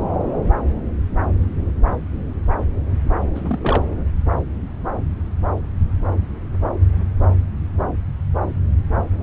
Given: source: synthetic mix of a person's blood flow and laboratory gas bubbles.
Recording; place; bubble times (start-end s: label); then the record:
Doppler ultrasound of blood flow; subclavian vein
3.35-3.85 s: bubbles
From the record:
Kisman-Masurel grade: 212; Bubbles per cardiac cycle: several, 3 to 8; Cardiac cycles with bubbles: 1 to 10%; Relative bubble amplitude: moderate (0.250 to 0.450); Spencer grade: 1 (occasional bubble signal discernible with the cardiac motion signal, with majority of cardiac periods free of bubbles); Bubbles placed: anywhere in the cardiac cycle